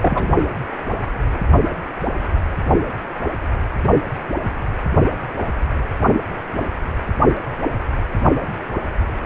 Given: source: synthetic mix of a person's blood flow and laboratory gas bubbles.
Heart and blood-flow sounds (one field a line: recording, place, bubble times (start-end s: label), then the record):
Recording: Doppler ultrasound of blood flow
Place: precordium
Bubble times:
0.01-0.29 s: bubbles
From the record:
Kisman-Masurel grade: 212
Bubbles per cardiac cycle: several, 3 to 8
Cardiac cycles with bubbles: 1 to 10%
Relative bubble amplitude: moderate (0.250 to 0.450)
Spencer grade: 1 (occasional bubble signal discernible with the cardiac motion signal, with majority of cardiac periods free of bubbles)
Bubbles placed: anywhere in the cardiac cycle